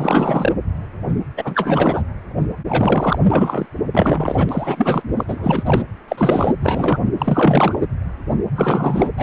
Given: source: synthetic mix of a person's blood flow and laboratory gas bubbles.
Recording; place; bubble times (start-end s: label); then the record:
Doppler ultrasound of blood flow; precordium
0.00-0.52 s: bubbles
1.37-2.03 s: bubbles
2.68-3.19 s: bubbles
3.27-3.66 s: bubbles
3.92-5.02 s: bubbles
5.17-5.24 s: bubbles
5.28-5.63 s: bubbles
5.66-5.82 s: bubbles
6.08-6.53 s: bubbles
6.61-7.02 s: bubbles
7.18-7.79 s: bubbles
8.55-9.12 s: bubbles
9.18-9.23 s: bubbles
From the record:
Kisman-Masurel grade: 333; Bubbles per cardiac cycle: rolling drumbeat, 9 or more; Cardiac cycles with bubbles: 50 to 99%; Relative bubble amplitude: loud (0.450 to 0.775); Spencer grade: 3 (all of the cardiac periods contain showers or single bubble signals, but not dominating or overriding the cardiac motion signals); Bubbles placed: anywhere in the cardiac cycle